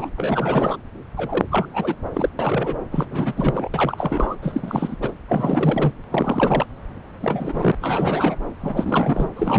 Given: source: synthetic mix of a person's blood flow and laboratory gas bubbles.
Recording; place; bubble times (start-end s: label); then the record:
Doppler ultrasound of blood flow; subclavian vein
0.00-0.10 s: bubbles
0.17-0.77 s: bubbles
1.17-1.44 s: bubbles
1.51-1.66 s: bubbles
1.73-1.95 s: bubbles
2.14-2.29 s: bubbles
2.39-2.77 s: bubbles
2.92-3.06 s: bubbles
3.10-3.33 s: bubbles
3.36-3.68 s: bubbles
3.74-4.36 s: bubbles
4.42-4.96 s: bubbles
5.02-5.11 s: bubbles
5.29-5.93 s: bubbles
6.10-6.66 s: bubbles
7.21-7.72 s: bubbles
7.79-8.36 s: bubbles
8.61-9.29 s: bubbles
9.36-9.59 s: bubbles
From the record:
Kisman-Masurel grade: 342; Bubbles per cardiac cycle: rolling drumbeat, 9 or more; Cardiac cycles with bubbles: 100%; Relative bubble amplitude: moderate (0.250 to 0.450); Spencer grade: 3 (all of the cardiac periods contain showers or single bubble signals, but not dominating or overriding the cardiac motion signals); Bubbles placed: anywhere in the cardiac cycle